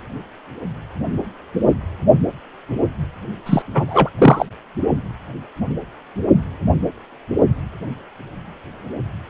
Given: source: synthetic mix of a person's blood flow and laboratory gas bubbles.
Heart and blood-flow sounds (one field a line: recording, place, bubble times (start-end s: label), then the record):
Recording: Doppler ultrasound of blood flow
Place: precordium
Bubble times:
3.46-3.62 s: bubbles
3.74-4.09 s: bubbles
4.18-4.45 s: bubbles
From the record:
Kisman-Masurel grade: 223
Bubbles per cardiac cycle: several, 3 to 8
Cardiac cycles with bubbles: 10 to 50%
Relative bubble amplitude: loud (0.450 to 0.775)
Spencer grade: 2 (many but less than half of the cardiac periods contain bubble signals, singularly or in groups)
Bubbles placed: only in the low amplitude regions of the cardiac cycle